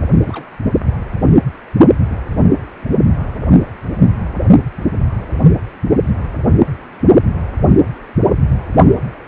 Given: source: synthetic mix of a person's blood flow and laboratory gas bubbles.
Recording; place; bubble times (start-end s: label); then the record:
Doppler ultrasound of blood flow; precordium
0.21-0.46 s: bubbles
From the record:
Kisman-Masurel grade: 221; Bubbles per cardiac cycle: several, 3 to 8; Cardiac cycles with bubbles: 10 to 50%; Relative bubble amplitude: barely perceptible (0.100 to 0.250); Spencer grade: 2 (many but less than half of the cardiac periods contain bubble signals, singularly or in groups); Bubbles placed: only in the low amplitude regions of the cardiac cycle